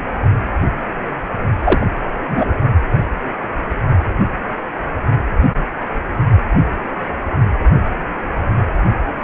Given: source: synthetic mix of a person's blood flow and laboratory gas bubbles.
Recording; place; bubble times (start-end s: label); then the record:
Doppler ultrasound of blood flow; precordium
1.60-1.87 s: bubbles
2.17-2.54 s: bubbles
From the record:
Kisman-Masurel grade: 113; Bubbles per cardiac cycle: 1 to 2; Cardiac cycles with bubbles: 1 to 10%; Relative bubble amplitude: loud (0.450 to 0.775); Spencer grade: 1 (occasional bubble signal discernible with the cardiac motion signal, with majority of cardiac periods free of bubbles); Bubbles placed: only in the low amplitude regions of the cardiac cycle